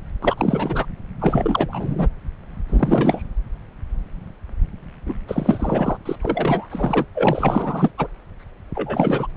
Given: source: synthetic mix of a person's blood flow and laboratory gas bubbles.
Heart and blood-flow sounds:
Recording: Doppler ultrasound of blood flow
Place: subclavian vein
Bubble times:
0.21-0.86 s: bubbles
1.19-2.08 s: bubbles
2.69-3.26 s: bubbles
5.06-5.15 s: bubbles
5.28-5.97 s: bubbles
6.05-6.16 s: bubbles
6.22-7.06 s: bubbles
7.15-7.91 s: bubbles
7.97-8.08 s: bubbles
8.75-9.28 s: bubbles
From the record:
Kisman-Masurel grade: 333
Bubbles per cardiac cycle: rolling drumbeat, 9 or more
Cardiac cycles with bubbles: 50 to 99%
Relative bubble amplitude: loud (0.450 to 0.775)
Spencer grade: 3 (all of the cardiac periods contain showers or single bubble signals, but not dominating or overriding the cardiac motion signals)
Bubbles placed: anywhere in the cardiac cycle

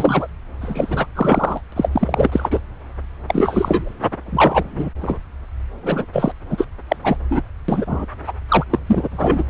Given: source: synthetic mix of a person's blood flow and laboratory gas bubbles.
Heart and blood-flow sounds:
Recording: Doppler ultrasound of blood flow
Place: subclavian vein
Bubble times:
0.00-0.27 s: bubbles
0.61-1.06 s: bubbles
1.15-1.61 s: bubbles
1.72-1.89 s: bubbles
1.92-2.59 s: bubbles
3.28-3.92 s: bubbles
4.26-4.89 s: bubbles
5.00-5.19 s: bubbles
5.83-6.06 s: bubbles
6.12-6.32 s: bubbles
6.50-6.65 s: bubbles
6.89-6.96 s: bubbles
7.04-7.17 s: bubbles
7.31-7.42 s: bubbles
7.68-8.05 s: bubbles
8.27-8.32 s: bubbles
8.49-8.64 s: bubbles
8.70-8.79 s: bubbles
8.86-9.43 s: bubbles
From the record:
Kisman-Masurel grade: 343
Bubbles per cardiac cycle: rolling drumbeat, 9 or more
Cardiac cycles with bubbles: 100%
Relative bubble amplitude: loud (0.450 to 0.775)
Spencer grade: 3 (all of the cardiac periods contain showers or single bubble signals, but not dominating or overriding the cardiac motion signals)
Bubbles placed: anywhere in the cardiac cycle

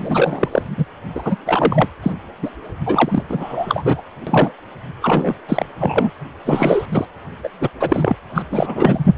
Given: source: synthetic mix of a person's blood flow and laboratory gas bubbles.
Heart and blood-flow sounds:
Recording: Doppler ultrasound of blood flow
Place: precordium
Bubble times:
0.00-0.66 s: bubbles
0.77-0.85 s: bubbles
1.15-1.36 s: bubbles
1.45-1.87 s: bubbles
2.02-2.12 s: bubbles
2.42-2.51 s: bubbles
2.85-3.23 s: bubbles
3.29-4.02 s: bubbles
4.27-4.52 s: bubbles
5.02-5.34 s: bubbles
5.49-5.66 s: bubbles
5.78-6.11 s: bubbles
6.45-6.87 s: bubbles
6.92-7.05 s: bubbles
7.43-7.49 s: bubbles
7.61-7.69 s: bubbles
7.79-8.16 s: bubbles
8.35-8.43 s: bubbles
8.52-9.06 s: bubbles
From the record:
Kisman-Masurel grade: 343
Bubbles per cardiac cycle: rolling drumbeat, 9 or more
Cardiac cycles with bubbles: 100%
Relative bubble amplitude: loud (0.450 to 0.775)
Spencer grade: 3 (all of the cardiac periods contain showers or single bubble signals, but not dominating or overriding the cardiac motion signals)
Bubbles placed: anywhere in the cardiac cycle

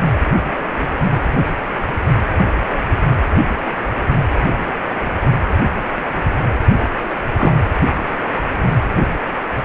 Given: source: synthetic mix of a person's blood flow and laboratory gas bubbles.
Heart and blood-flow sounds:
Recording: Doppler ultrasound of blood flow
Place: precordium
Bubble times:
7.38-7.55 s: bubbles
From the record:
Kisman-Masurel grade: 113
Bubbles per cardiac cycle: 1 to 2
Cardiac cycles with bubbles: 1 to 10%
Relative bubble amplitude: loud (0.450 to 0.775)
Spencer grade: 1 (occasional bubble signal discernible with the cardiac motion signal, with majority of cardiac periods free of bubbles)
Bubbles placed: anywhere in the cardiac cycle

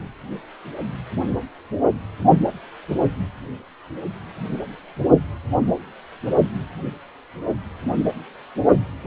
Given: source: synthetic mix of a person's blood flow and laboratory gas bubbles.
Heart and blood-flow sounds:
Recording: Doppler ultrasound of blood flow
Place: precordium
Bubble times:
no bubbles
From the record:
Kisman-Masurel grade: 000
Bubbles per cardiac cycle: 0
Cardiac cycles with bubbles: 0%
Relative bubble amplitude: no bubbles discernible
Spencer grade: 0 (complete lack of bubble signals)

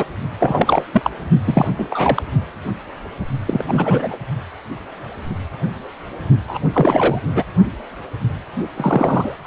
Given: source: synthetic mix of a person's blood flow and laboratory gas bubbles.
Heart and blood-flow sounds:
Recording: Doppler ultrasound of blood flow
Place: precordium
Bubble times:
0.00-0.04 s: bubbles
0.39-0.85 s: bubbles
0.93-1.10 s: bubbles
1.45-1.68 s: bubbles
1.76-2.22 s: bubbles
3.47-3.65 s: bubbles
3.68-4.17 s: bubbles
6.46-6.59 s: bubbles
6.72-7.19 s: bubbles
7.34-7.44 s: bubbles
8.76-9.35 s: bubbles
9.44-9.47 s: bubbles
From the record:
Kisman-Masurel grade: 333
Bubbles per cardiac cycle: rolling drumbeat, 9 or more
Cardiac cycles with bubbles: 50 to 99%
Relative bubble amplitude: loud (0.450 to 0.775)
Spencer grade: 3 (all of the cardiac periods contain showers or single bubble signals, but not dominating or overriding the cardiac motion signals)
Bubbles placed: only in the low amplitude regions of the cardiac cycle

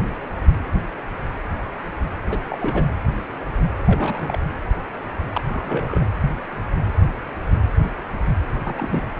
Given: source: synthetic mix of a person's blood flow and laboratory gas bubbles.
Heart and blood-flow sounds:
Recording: Doppler ultrasound of blood flow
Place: precordium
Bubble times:
2.29-2.39 s: bubbles
2.45-2.58 s: bubbles
2.61-2.86 s: bubbles
3.75-4.39 s: bubbles
5.34-5.41 s: bubbles
5.46-6.06 s: bubbles
8.63-9.03 s: bubbles
From the record:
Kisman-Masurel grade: 222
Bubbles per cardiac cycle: several, 3 to 8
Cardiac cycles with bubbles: 10 to 50%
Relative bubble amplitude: moderate (0.250 to 0.450)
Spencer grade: 2 (many but less than half of the cardiac periods contain bubble signals, singularly or in groups)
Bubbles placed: anywhere in the cardiac cycle

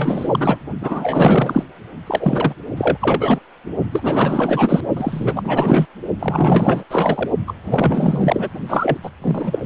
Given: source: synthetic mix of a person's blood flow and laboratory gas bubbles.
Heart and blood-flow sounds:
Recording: Doppler ultrasound of blood flow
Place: precordium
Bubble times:
0.00-0.58 s: bubbles
0.81-1.64 s: bubbles
2.06-2.54 s: bubbles
2.77-3.40 s: bubbles
3.92-4.80 s: bubbles
4.96-5.86 s: bubbles
6.19-6.84 s: bubbles
6.90-7.29 s: bubbles
7.46-7.53 s: bubbles
7.65-8.48 s: bubbles
8.69-8.98 s: bubbles
9.03-9.11 s: bubbles
9.21-9.59 s: bubbles
From the record:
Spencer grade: 4 (maximum detectable bubble signal sounding continuously throughout systole and diastole of every cardiac period, and overriding the amplitude of the normal cardiac signals)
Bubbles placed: only in the low amplitude regions of the cardiac cycle

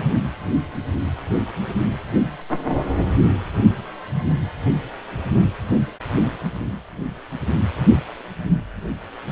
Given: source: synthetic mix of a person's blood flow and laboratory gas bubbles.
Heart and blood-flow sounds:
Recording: Doppler ultrasound of blood flow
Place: precordium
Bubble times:
no bubbles
From the record:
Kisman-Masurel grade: 000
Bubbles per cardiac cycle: 0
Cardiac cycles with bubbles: 0%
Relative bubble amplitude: no bubbles discernible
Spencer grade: 0 (complete lack of bubble signals)

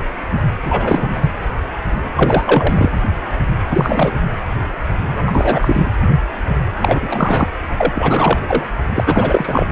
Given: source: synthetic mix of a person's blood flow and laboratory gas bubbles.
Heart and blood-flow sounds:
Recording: Doppler ultrasound of blood flow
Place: precordium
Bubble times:
0.64-1.11 s: bubbles
1.20-1.34 s: bubbles
2.15-2.90 s: bubbles
3.69-4.11 s: bubbles
5.26-5.86 s: bubbles
6.80-7.50 s: bubbles
7.78-8.39 s: bubbles
8.48-8.64 s: bubbles
8.89-9.66 s: bubbles
From the record:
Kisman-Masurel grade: 333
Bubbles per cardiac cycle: rolling drumbeat, 9 or more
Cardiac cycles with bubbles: 50 to 99%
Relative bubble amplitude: loud (0.450 to 0.775)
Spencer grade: 3 (all of the cardiac periods contain showers or single bubble signals, but not dominating or overriding the cardiac motion signals)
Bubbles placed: anywhere in the cardiac cycle

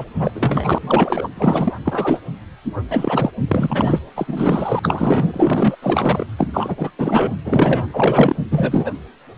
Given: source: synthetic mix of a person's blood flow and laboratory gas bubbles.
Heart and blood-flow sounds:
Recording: Doppler ultrasound of blood flow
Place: precordium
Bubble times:
0.00-0.05 s: bubbles
0.19-0.32 s: bubbles
0.34-0.78 s: bubbles
0.81-1.27 s: bubbles
1.35-1.73 s: bubbles
1.85-2.20 s: bubbles
2.90-3.31 s: bubbles
3.48-3.99 s: bubbles
4.16-4.80 s: bubbles
4.82-5.76 s: bubbles
5.82-6.27 s: bubbles
6.37-6.48 s: bubbles
6.54-6.91 s: bubbles
6.99-7.33 s: bubbles
7.45-7.85 s: bubbles
7.93-8.35 s: bubbles
8.50-8.91 s: bubbles
From the record:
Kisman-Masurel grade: 333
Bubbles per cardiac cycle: rolling drumbeat, 9 or more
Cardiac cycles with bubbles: 50 to 99%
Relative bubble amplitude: loud (0.450 to 0.775)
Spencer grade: 3 (all of the cardiac periods contain showers or single bubble signals, but not dominating or overriding the cardiac motion signals)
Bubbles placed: anywhere in the cardiac cycle

